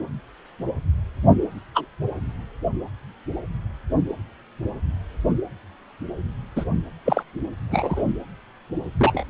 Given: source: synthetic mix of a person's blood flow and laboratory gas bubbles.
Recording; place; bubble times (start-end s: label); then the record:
Doppler ultrasound of blood flow; precordium
1.74-1.87 s: bubbles
6.56-6.64 s: bubbles
7.05-7.23 s: bubbles
7.71-8.05 s: bubbles
8.99-9.24 s: bubbles
From the record:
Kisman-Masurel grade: 122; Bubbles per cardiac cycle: 1 to 2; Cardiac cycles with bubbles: 10 to 50%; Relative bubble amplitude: moderate (0.250 to 0.450); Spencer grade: 2 (many but less than half of the cardiac periods contain bubble signals, singularly or in groups); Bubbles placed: anywhere in the cardiac cycle